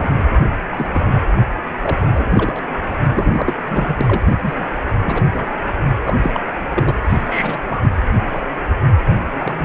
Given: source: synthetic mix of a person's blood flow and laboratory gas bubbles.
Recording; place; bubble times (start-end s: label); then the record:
Doppler ultrasound of blood flow; precordium
0.00-0.09 s: bubbles
0.40-0.47 s: bubbles
0.72-1.07 s: bubbles
1.79-2.64 s: bubbles
3.10-3.54 s: bubbles
3.66-3.96 s: bubbles
4.00-4.34 s: bubbles
4.42-4.68 s: bubbles
5.03-5.23 s: bubbles
5.33-5.46 s: bubbles
5.87-5.92 s: bubbles
6.03-6.17 s: bubbles
6.22-6.31 s: bubbles
6.33-6.41 s: bubbles
6.74-6.95 s: bubbles
7.08-7.58 s: bubbles
7.63-7.93 s: bubbles
8.32-8.40 s: bubbles
8.56-8.65 s: bubbles
9.39-9.65 s: bubbles
From the record:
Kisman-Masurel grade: 242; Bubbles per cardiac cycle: several, 3 to 8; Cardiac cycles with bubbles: 100%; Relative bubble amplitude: moderate (0.250 to 0.450); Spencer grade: 3 (all of the cardiac periods contain showers or single bubble signals, but not dominating or overriding the cardiac motion signals); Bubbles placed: anywhere in the cardiac cycle